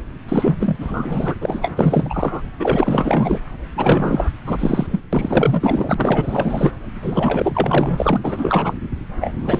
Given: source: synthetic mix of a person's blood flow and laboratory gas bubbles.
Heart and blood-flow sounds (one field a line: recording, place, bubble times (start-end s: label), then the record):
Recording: Doppler ultrasound of blood flow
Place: subclavian vein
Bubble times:
0.28-0.76 s: bubbles
0.79-1.36 s: bubbles
1.41-1.73 s: bubbles
1.77-2.42 s: bubbles
2.59-3.41 s: bubbles
3.76-4.29 s: bubbles
4.46-4.86 s: bubbles
4.91-4.99 s: bubbles
5.12-6.71 s: bubbles
7.02-8.20 s: bubbles
8.24-8.75 s: bubbles
9.21-9.32 s: bubbles
9.37-9.60 s: bubbles
From the record:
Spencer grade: 4 (maximum detectable bubble signal sounding continuously throughout systole and diastole of every cardiac period, and overriding the amplitude of the normal cardiac signals)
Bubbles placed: anywhere in the cardiac cycle